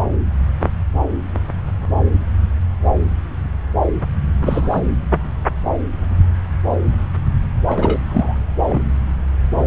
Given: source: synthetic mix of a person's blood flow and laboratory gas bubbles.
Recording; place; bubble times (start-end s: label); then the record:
Doppler ultrasound of blood flow; subclavian vein
4.42-4.81 s: bubbles
7.67-8.00 s: bubbles
8.08-8.35 s: bubbles
8.68-8.83 s: bubbles
From the record:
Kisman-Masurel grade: 222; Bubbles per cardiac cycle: several, 3 to 8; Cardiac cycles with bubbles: 10 to 50%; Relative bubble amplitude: moderate (0.250 to 0.450); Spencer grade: 2 (many but less than half of the cardiac periods contain bubble signals, singularly or in groups); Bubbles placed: anywhere in the cardiac cycle